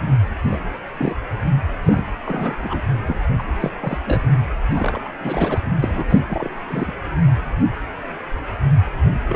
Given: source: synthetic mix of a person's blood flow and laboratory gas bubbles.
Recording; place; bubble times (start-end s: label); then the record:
Doppler ultrasound of blood flow; precordium
0.42-0.59 s: bubbles
0.99-1.15 s: bubbles
1.85-2.06 s: bubbles
2.25-2.81 s: bubbles
3.07-3.19 s: bubbles
3.38-3.43 s: bubbles
3.59-3.71 s: bubbles
3.81-3.98 s: bubbles
4.05-4.22 s: bubbles
4.70-5.10 s: bubbles
5.20-5.60 s: bubbles
5.66-5.75 s: bubbles
5.81-6.04 s: bubbles
6.08-6.20 s: bubbles
6.26-6.49 s: bubbles
6.67-6.93 s: bubbles
9.27-9.36 s: bubbles
From the record:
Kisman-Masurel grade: 232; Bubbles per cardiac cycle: several, 3 to 8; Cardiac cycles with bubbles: 50 to 99%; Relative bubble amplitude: moderate (0.250 to 0.450); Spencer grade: 3 (all of the cardiac periods contain showers or single bubble signals, but not dominating or overriding the cardiac motion signals); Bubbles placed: anywhere in the cardiac cycle